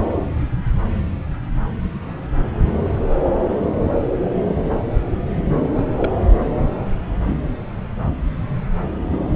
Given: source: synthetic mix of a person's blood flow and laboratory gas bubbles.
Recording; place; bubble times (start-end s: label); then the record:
Doppler ultrasound of blood flow; subclavian vein
5.73-5.90 s: bubbles
5.97-6.12 s: bubbles
From the record:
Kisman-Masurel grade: 122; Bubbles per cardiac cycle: 1 to 2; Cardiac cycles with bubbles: 10 to 50%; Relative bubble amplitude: moderate (0.250 to 0.450); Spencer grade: 2 (many but less than half of the cardiac periods contain bubble signals, singularly or in groups); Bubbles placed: anywhere in the cardiac cycle